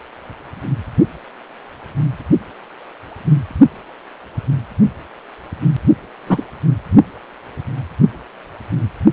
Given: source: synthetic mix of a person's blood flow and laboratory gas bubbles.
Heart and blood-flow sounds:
Doppler ultrasound of blood flow; precordium
6.26-6.43 s: bubbles
From the record:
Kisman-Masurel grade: 113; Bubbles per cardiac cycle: 1 to 2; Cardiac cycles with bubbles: 1 to 10%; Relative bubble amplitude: loud (0.450 to 0.775); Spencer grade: 1 (occasional bubble signal discernible with the cardiac motion signal, with majority of cardiac periods free of bubbles); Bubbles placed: only in the low amplitude regions of the cardiac cycle

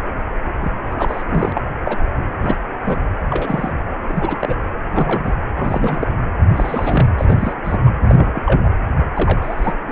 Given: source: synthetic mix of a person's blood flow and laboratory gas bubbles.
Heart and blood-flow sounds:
Doppler ultrasound of blood flow; precordium
0.60-0.73 s: bubbles
0.91-1.23 s: bubbles
1.29-1.61 s: bubbles
1.84-1.97 s: bubbles
2.42-2.56 s: bubbles
2.83-3.02 s: bubbles
3.30-3.73 s: bubbles
4.08-4.37 s: bubbles
4.40-4.55 s: bubbles
4.92-5.33 s: bubbles
5.57-6.08 s: bubbles
6.50-7.08 s: bubbles
7.18-7.55 s: bubbles
7.64-7.77 s: bubbles
7.86-7.91 s: bubbles
8.00-8.42 s: bubbles
8.46-8.70 s: bubbles
9.15-9.72 s: bubbles
9.88-9.91 s: bubbles
From the record:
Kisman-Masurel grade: 242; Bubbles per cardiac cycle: several, 3 to 8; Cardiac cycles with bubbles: 100%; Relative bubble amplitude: moderate (0.250 to 0.450); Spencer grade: 3 (all of the cardiac periods contain showers or single bubble signals, but not dominating or overriding the cardiac motion signals); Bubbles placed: anywhere in the cardiac cycle

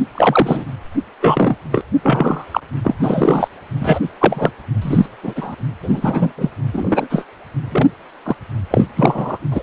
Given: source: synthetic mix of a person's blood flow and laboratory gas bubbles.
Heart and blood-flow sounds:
Doppler ultrasound of blood flow; precordium
0.00-0.04 s: bubbles
0.14-0.65 s: bubbles
1.22-1.56 s: bubbles
1.71-1.81 s: bubbles
2.02-2.45 s: bubbles
2.52-2.60 s: bubbles
2.83-2.96 s: bubbles
3.00-3.48 s: bubbles
3.80-4.00 s: bubbles
4.20-4.50 s: bubbles
4.81-5.06 s: bubbles
5.22-5.55 s: bubbles
5.82-6.32 s: bubbles
6.38-6.49 s: bubbles
6.72-7.25 s: bubbles
7.71-7.88 s: bubbles
8.25-8.36 s: bubbles
8.70-8.86 s: bubbles
8.96-9.38 s: bubbles
9.50-9.62 s: bubbles
From the record:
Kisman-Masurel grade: 243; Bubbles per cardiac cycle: several, 3 to 8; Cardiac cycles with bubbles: 100%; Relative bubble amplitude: loud (0.450 to 0.775); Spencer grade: 3 (all of the cardiac periods contain showers or single bubble signals, but not dominating or overriding the cardiac motion signals); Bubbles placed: anywhere in the cardiac cycle

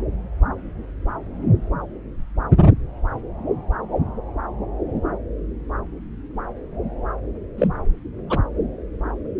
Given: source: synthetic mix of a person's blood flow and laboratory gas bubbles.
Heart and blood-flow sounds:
Doppler ultrasound of blood flow; subclavian vein
7.58-7.68 s: bubbles
8.29-8.38 s: bubbles
From the record:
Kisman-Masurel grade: 112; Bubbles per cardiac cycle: 1 to 2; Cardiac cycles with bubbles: 1 to 10%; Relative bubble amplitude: moderate (0.250 to 0.450); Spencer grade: 1 (occasional bubble signal discernible with the cardiac motion signal, with majority of cardiac periods free of bubbles); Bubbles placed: anywhere in the cardiac cycle

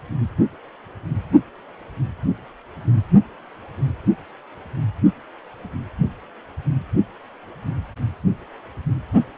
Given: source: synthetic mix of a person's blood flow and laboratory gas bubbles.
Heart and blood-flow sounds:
Doppler ultrasound of blood flow; precordium
no bubbles
From the record:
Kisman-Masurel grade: 000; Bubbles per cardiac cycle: 0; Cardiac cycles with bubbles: 0%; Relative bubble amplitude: no bubbles discernible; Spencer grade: 0 (complete lack of bubble signals)

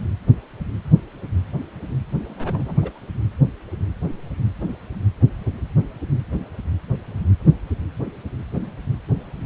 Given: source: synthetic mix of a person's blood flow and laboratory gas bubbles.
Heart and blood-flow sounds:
Doppler ultrasound of blood flow; precordium
2.28-2.99 s: bubbles
From the record:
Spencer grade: 1 (occasional bubble signal discernible with the cardiac motion signal, with majority of cardiac periods free of bubbles); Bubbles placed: anywhere in the cardiac cycle

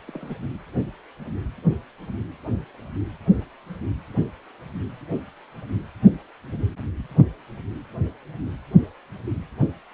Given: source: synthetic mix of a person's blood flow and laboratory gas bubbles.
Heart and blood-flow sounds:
Doppler ultrasound of blood flow; precordium
0.07-0.35 s: bubbles
From the record:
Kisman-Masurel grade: 211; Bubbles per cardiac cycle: several, 3 to 8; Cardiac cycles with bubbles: 1 to 10%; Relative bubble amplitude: barely perceptible (0.100 to 0.250); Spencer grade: 1 (occasional bubble signal discernible with the cardiac motion signal, with majority of cardiac periods free of bubbles); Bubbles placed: only in the low amplitude regions of the cardiac cycle

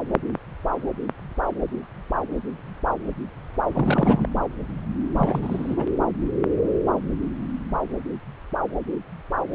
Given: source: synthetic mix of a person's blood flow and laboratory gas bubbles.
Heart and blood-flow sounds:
Doppler ultrasound of blood flow; subclavian vein
3.70-4.27 s: bubbles
5.11-5.86 s: bubbles
From the record:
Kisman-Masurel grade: 212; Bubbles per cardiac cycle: several, 3 to 8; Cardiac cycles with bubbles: 1 to 10%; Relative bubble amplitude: moderate (0.250 to 0.450); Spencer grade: 1 (occasional bubble signal discernible with the cardiac motion signal, with majority of cardiac periods free of bubbles); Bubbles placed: anywhere in the cardiac cycle

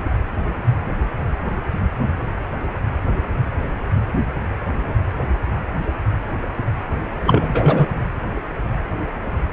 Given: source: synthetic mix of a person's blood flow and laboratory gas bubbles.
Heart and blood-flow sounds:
Doppler ultrasound of blood flow; precordium
7.24-7.87 s: bubbles
From the record:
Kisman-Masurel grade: 213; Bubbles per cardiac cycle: several, 3 to 8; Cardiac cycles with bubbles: 1 to 10%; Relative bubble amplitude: loud (0.450 to 0.775); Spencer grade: 1 (occasional bubble signal discernible with the cardiac motion signal, with majority of cardiac periods free of bubbles); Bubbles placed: anywhere in the cardiac cycle

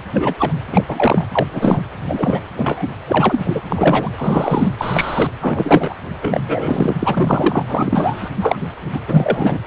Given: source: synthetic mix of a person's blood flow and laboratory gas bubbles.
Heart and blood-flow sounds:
Doppler ultrasound of blood flow; precordium
0.13-0.35 s: bubbles
0.39-0.53 s: bubbles
0.72-0.84 s: bubbles
0.88-1.25 s: bubbles
1.32-1.82 s: bubbles
2.08-2.44 s: bubbles
2.56-2.85 s: bubbles
3.07-3.61 s: bubbles
3.69-4.09 s: bubbles
4.18-4.69 s: bubbles
4.77-5.30 s: bubbles
5.40-5.95 s: bubbles
6.22-6.96 s: bubbles
6.99-8.29 s: bubbles
8.41-8.57 s: bubbles
8.81-8.99 s: bubbles
9.08-9.60 s: bubbles
From the record:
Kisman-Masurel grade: 243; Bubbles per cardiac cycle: several, 3 to 8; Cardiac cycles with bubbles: 100%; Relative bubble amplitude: loud (0.450 to 0.775); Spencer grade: 3 (all of the cardiac periods contain showers or single bubble signals, but not dominating or overriding the cardiac motion signals); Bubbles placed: anywhere in the cardiac cycle

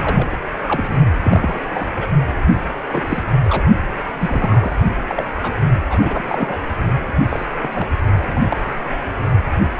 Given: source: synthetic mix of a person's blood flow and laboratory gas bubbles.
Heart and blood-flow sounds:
Doppler ultrasound of blood flow; precordium
0.00-0.28 s: bubbles
0.67-0.95 s: bubbles
1.21-1.91 s: bubbles
1.97-2.08 s: bubbles
2.88-3.04 s: bubbles
3.07-3.24 s: bubbles
3.44-3.64 s: bubbles
4.20-4.74 s: bubbles
5.07-5.24 s: bubbles
5.42-5.52 s: bubbles
5.89-6.57 s: bubbles
7.29-7.46 s: bubbles
7.62-7.90 s: bubbles
8.33-8.73 s: bubbles
From the record:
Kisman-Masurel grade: 242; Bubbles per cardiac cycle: several, 3 to 8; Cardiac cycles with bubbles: 100%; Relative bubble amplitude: moderate (0.250 to 0.450); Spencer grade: 3 (all of the cardiac periods contain showers or single bubble signals, but not dominating or overriding the cardiac motion signals); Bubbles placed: only in the low amplitude regions of the cardiac cycle

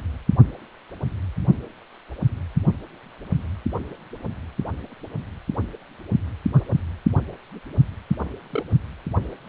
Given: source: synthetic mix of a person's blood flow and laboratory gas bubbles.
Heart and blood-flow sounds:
Doppler ultrasound of blood flow; precordium
8.50-8.63 s: bubbles
From the record:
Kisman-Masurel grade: 111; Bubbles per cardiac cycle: 1 to 2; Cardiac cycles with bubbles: 1 to 10%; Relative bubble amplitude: barely perceptible (0.100 to 0.250); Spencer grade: 1 (occasional bubble signal discernible with the cardiac motion signal, with majority of cardiac periods free of bubbles); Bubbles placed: only in the low amplitude regions of the cardiac cycle

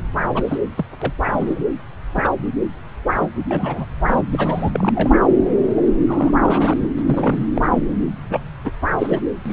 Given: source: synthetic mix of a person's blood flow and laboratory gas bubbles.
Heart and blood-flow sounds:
Doppler ultrasound of blood flow; subclavian vein
0.34-0.43 s: bubbles
0.47-0.58 s: bubbles
0.78-0.85 s: bubbles
1.01-1.14 s: bubbles
1.23-1.62 s: bubbles
2.15-2.35 s: bubbles
3.21-3.29 s: bubbles
3.50-3.86 s: bubbles
4.07-4.22 s: bubbles
4.32-5.10 s: bubbles
5.77-5.81 s: bubbles
6.07-6.32 s: bubbles
6.43-6.74 s: bubbles
6.81-6.88 s: bubbles
6.97-7.03 s: bubbles
7.07-7.46 s: bubbles
7.55-7.68 s: bubbles
8.29-8.41 s: bubbles
8.64-8.71 s: bubbles
8.98-9.21 s: bubbles
9.46-9.53 s: bubbles
From the record:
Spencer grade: 3 (all of the cardiac periods contain showers or single bubble signals, but not dominating or overriding the cardiac motion signals); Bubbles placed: anywhere in the cardiac cycle

